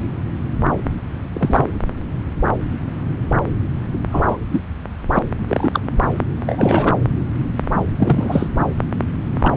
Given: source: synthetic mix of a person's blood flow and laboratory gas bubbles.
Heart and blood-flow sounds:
Doppler ultrasound of blood flow; subclavian vein
1.33-1.66 s: bubbles
4.11-4.38 s: bubbles
4.51-4.61 s: bubbles
5.13-5.19 s: bubbles
5.48-5.80 s: bubbles
6.36-6.96 s: bubbles
7.99-8.47 s: bubbles
9.38-9.52 s: bubbles
From the record:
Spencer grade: 3 (all of the cardiac periods contain showers or single bubble signals, but not dominating or overriding the cardiac motion signals); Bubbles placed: anywhere in the cardiac cycle

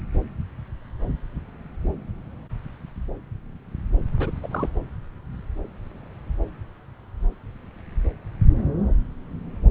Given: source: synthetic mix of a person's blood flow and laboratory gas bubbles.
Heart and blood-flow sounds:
Doppler ultrasound of blood flow; subclavian vein
4.19-4.30 s: bubbles
4.43-4.48 s: bubbles
4.51-4.69 s: bubbles
From the record:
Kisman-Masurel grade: 211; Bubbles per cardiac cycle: several, 3 to 8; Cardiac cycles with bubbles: 1 to 10%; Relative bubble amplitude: barely perceptible (0.100 to 0.250); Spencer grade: 1 (occasional bubble signal discernible with the cardiac motion signal, with majority of cardiac periods free of bubbles); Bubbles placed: anywhere in the cardiac cycle

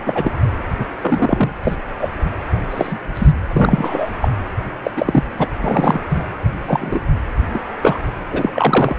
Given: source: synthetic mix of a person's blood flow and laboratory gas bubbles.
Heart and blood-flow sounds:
Doppler ultrasound of blood flow; precordium
0.05-0.34 s: bubbles
0.79-0.85 s: bubbles
1.01-1.53 s: bubbles
1.64-1.76 s: bubbles
2.00-2.09 s: bubbles
2.70-2.99 s: bubbles
3.14-3.33 s: bubbles
3.49-4.11 s: bubbles
4.21-4.29 s: bubbles
4.83-4.91 s: bubbles
4.96-5.23 s: bubbles
5.38-5.45 s: bubbles
5.60-6.00 s: bubbles
6.10-6.25 s: bubbles
6.66-7.00 s: bubbles
7.53-7.60 s: bubbles
7.82-7.97 s: bubbles
8.30-8.96 s: bubbles
From the record:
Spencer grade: 3 (all of the cardiac periods contain showers or single bubble signals, but not dominating or overriding the cardiac motion signals); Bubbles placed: anywhere in the cardiac cycle

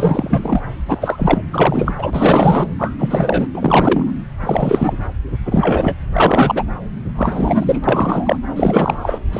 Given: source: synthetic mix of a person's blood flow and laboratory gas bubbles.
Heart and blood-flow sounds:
Doppler ultrasound of blood flow; subclavian vein
0.00-0.61 s: bubbles
0.88-1.42 s: bubbles
1.53-1.94 s: bubbles
1.98-2.68 s: bubbles
2.78-2.93 s: bubbles
2.98-3.48 s: bubbles
3.53-4.14 s: bubbles
4.41-4.94 s: bubbles
5.46-5.95 s: bubbles
6.12-6.64 s: bubbles
7.16-7.80 s: bubbles
7.84-8.38 s: bubbles
8.55-9.19 s: bubbles
9.31-9.40 s: bubbles
From the record:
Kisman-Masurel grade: 343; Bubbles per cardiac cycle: rolling drumbeat, 9 or more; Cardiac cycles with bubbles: 100%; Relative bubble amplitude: loud (0.450 to 0.775); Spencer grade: 3 (all of the cardiac periods contain showers or single bubble signals, but not dominating or overriding the cardiac motion signals); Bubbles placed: anywhere in the cardiac cycle

